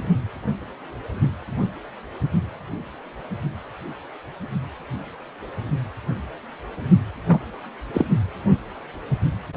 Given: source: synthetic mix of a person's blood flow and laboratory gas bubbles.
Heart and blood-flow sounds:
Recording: Doppler ultrasound of blood flow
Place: precordium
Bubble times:
7.28-7.38 s: bubbles
7.94-8.05 s: bubbles
From the record:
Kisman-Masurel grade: 212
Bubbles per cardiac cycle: several, 3 to 8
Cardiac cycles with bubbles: 1 to 10%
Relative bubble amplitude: moderate (0.250 to 0.450)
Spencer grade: 1 (occasional bubble signal discernible with the cardiac motion signal, with majority of cardiac periods free of bubbles)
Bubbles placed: only in the low amplitude regions of the cardiac cycle

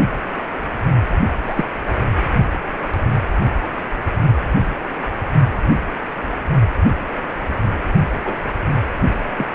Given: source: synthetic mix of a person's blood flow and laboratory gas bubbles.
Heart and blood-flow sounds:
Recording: Doppler ultrasound of blood flow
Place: precordium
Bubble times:
1.46-1.65 s: bubbles
8.23-8.35 s: bubbles
9.37-9.46 s: bubbles
From the record:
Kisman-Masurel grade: 122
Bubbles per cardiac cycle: 1 to 2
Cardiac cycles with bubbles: 10 to 50%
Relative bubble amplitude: moderate (0.250 to 0.450)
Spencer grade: 2 (many but less than half of the cardiac periods contain bubble signals, singularly or in groups)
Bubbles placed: only in the low amplitude regions of the cardiac cycle

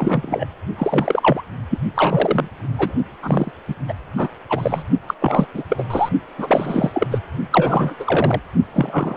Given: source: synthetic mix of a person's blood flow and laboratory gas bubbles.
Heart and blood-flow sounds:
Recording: Doppler ultrasound of blood flow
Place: precordium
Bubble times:
0.00-0.46 s: bubbles
0.77-1.42 s: bubbles
1.70-1.78 s: bubbles
1.95-2.48 s: bubbles
2.78-2.92 s: bubbles
3.22-3.52 s: bubbles
3.67-3.75 s: bubbles
3.88-3.93 s: bubbles
4.17-4.29 s: bubbles
4.50-4.83 s: bubbles
5.07-5.14 s: bubbles
5.21-5.47 s: bubbles
5.54-5.63 s: bubbles
5.69-5.83 s: bubbles
5.90-6.09 s: bubbles
6.38-6.91 s: bubbles
6.93-7.07 s: bubbles
7.11-7.19 s: bubbles
7.50-7.94 s: bubbles
7.99-8.40 s: bubbles
8.73-9.17 s: bubbles
From the record:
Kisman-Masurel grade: 343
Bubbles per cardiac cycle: rolling drumbeat, 9 or more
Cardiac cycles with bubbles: 100%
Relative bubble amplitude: loud (0.450 to 0.775)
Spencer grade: 3 (all of the cardiac periods contain showers or single bubble signals, but not dominating or overriding the cardiac motion signals)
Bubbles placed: only in the low amplitude regions of the cardiac cycle

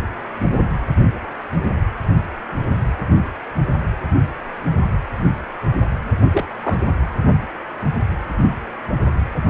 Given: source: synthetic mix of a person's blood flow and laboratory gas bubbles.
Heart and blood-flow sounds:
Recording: Doppler ultrasound of blood flow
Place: precordium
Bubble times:
6.33-6.45 s: bubbles
6.62-6.79 s: bubbles
From the record:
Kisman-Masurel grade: 212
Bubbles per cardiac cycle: several, 3 to 8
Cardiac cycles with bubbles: 1 to 10%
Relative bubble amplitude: moderate (0.250 to 0.450)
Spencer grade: 1 (occasional bubble signal discernible with the cardiac motion signal, with majority of cardiac periods free of bubbles)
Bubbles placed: only in the low amplitude regions of the cardiac cycle

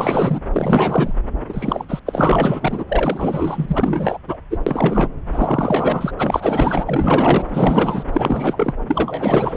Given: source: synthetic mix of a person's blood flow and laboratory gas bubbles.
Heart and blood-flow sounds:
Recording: Doppler ultrasound of blood flow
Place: subclavian vein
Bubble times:
0.00-0.40 s: bubbles
0.52-1.14 s: bubbles
1.49-1.85 s: bubbles
1.89-2.00 s: bubbles
2.06-2.85 s: bubbles
2.88-4.17 s: bubbles
4.27-4.38 s: bubbles
4.50-4.58 s: bubbles
4.67-5.07 s: bubbles
5.31-6.12 s: bubbles
6.19-8.04 s: bubbles
8.12-8.74 s: bubbles
8.88-9.56 s: bubbles
From the record:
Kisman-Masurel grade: 444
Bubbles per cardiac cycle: continuous sound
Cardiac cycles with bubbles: 100%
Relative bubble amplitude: maximal (0.775 to 0.999)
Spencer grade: 4 (maximum detectable bubble signal sounding continuously throughout systole and diastole of every cardiac period, and overriding the amplitude of the normal cardiac signals)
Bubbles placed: anywhere in the cardiac cycle

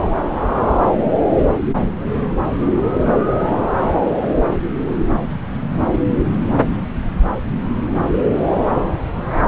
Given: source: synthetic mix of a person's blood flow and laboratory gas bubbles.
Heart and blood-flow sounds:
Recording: Doppler ultrasound of blood flow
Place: subclavian vein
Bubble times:
0.04-0.08 s: bubbles
From the record:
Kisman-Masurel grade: 111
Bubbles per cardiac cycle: 1 to 2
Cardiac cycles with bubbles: 1 to 10%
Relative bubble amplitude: barely perceptible (0.100 to 0.250)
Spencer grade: 1 (occasional bubble signal discernible with the cardiac motion signal, with majority of cardiac periods free of bubbles)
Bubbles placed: anywhere in the cardiac cycle

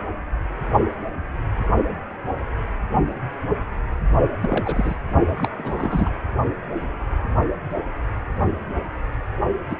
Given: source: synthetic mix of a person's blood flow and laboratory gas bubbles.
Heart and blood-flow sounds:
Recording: Doppler ultrasound of blood flow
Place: precordium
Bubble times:
4.41-4.94 s: bubbles
5.36-5.48 s: bubbles
5.58-6.10 s: bubbles
9.70-9.77 s: bubbles
From the record:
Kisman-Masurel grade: 221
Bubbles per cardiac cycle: several, 3 to 8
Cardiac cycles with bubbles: 10 to 50%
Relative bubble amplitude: barely perceptible (0.100 to 0.250)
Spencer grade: 2 (many but less than half of the cardiac periods contain bubble signals, singularly or in groups)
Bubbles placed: only in the low amplitude regions of the cardiac cycle

